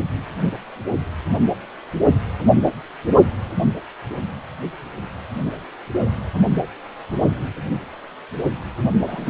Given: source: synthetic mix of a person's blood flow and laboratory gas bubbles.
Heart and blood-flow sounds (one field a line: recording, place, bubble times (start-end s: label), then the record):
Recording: Doppler ultrasound of blood flow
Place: precordium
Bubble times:
9.07-9.30 s: bubbles
From the record:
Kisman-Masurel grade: 123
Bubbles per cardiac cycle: 1 to 2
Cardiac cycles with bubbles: 10 to 50%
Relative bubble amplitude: loud (0.450 to 0.775)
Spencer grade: 2 (many but less than half of the cardiac periods contain bubble signals, singularly or in groups)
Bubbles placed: only in the low amplitude regions of the cardiac cycle